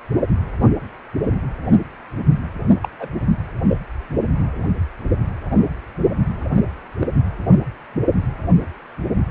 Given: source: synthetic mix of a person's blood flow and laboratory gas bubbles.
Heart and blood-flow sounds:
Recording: Doppler ultrasound of blood flow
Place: precordium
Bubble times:
2.82-2.88 s: bubbles
2.99-3.10 s: bubbles
3.68-3.77 s: bubbles
7.00-7.07 s: bubbles
From the record:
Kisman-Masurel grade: 121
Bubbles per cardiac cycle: 1 to 2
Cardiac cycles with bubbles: 10 to 50%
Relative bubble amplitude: barely perceptible (0.100 to 0.250)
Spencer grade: 2 (many but less than half of the cardiac periods contain bubble signals, singularly or in groups)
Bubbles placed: anywhere in the cardiac cycle

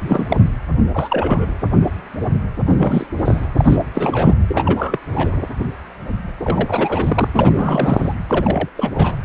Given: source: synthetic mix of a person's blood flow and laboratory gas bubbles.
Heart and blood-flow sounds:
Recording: Doppler ultrasound of blood flow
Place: precordium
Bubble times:
0.00-0.39 s: bubbles
0.94-1.54 s: bubbles
2.66-3.06 s: bubbles
3.18-3.46 s: bubbles
3.57-3.76 s: bubbles
3.95-4.34 s: bubbles
4.48-5.00 s: bubbles
5.13-5.42 s: bubbles
6.45-7.28 s: bubbles
7.33-8.14 s: bubbles
8.28-8.69 s: bubbles
8.76-8.90 s: bubbles
8.96-9.16 s: bubbles
From the record:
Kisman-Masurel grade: 332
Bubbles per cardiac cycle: rolling drumbeat, 9 or more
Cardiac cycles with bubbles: 50 to 99%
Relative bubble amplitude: moderate (0.250 to 0.450)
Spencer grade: 3 (all of the cardiac periods contain showers or single bubble signals, but not dominating or overriding the cardiac motion signals)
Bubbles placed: anywhere in the cardiac cycle

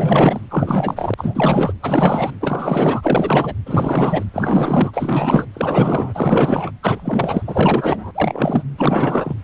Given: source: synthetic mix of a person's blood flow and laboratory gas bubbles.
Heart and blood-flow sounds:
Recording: Doppler ultrasound of blood flow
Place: precordium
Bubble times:
0.00-0.41 s: bubbles
0.50-1.14 s: bubbles
1.17-1.73 s: bubbles
1.82-2.30 s: bubbles
2.40-3.54 s: bubbles
3.65-4.25 s: bubbles
4.33-4.91 s: bubbles
4.94-5.46 s: bubbles
5.54-6.71 s: bubbles
6.83-7.42 s: bubbles
7.47-8.11 s: bubbles
8.14-8.64 s: bubbles
8.77-9.34 s: bubbles
From the record:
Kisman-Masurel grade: 444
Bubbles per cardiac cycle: continuous sound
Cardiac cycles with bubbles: 100%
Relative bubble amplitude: maximal (0.775 to 0.999)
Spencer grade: 4 (maximum detectable bubble signal sounding continuously throughout systole and diastole of every cardiac period, and overriding the amplitude of the normal cardiac signals)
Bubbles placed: anywhere in the cardiac cycle

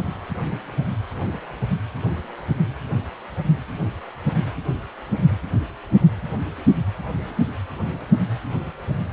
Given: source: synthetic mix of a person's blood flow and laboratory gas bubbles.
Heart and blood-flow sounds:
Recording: Doppler ultrasound of blood flow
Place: precordium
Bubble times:
no bubbles
From the record:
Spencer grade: 0 (complete lack of bubble signals)

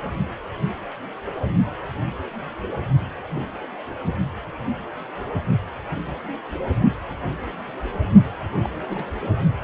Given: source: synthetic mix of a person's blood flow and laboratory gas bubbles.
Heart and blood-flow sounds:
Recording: Doppler ultrasound of blood flow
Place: precordium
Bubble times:
8.64-8.70 s: bubbles
8.88-9.04 s: bubbles
From the record:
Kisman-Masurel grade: 121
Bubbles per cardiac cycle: 1 to 2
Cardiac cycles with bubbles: 10 to 50%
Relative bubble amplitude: barely perceptible (0.100 to 0.250)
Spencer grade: 2 (many but less than half of the cardiac periods contain bubble signals, singularly or in groups)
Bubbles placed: only in the low amplitude regions of the cardiac cycle

